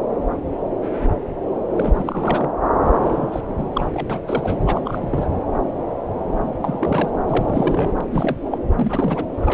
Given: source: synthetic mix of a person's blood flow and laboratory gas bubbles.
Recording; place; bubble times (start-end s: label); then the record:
Doppler ultrasound of blood flow; subclavian vein
1.76-2.48 s: bubbles
2.84-2.92 s: bubbles
3.00-3.70 s: bubbles
3.73-3.85 s: bubbles
3.94-4.19 s: bubbles
4.25-4.58 s: bubbles
4.66-4.80 s: bubbles
4.84-4.99 s: bubbles
5.02-5.08 s: bubbles
5.10-5.30 s: bubbles
6.61-7.10 s: bubbles
7.27-7.92 s: bubbles
8.00-8.04 s: bubbles
8.11-8.38 s: bubbles
8.45-8.58 s: bubbles
8.75-9.25 s: bubbles
9.37-9.54 s: bubbles
From the record:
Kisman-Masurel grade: 332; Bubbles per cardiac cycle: rolling drumbeat, 9 or more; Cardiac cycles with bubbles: 50 to 99%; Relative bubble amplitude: moderate (0.250 to 0.450); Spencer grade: 3 (all of the cardiac periods contain showers or single bubble signals, but not dominating or overriding the cardiac motion signals); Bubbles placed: anywhere in the cardiac cycle